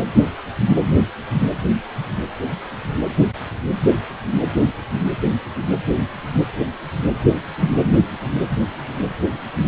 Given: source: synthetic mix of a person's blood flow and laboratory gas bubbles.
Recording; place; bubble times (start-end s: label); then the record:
Doppler ultrasound of blood flow; precordium
no bubbles
From the record:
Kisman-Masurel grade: 000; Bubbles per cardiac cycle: 0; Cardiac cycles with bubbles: 0%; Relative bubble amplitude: no bubbles discernible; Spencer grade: 0 (complete lack of bubble signals)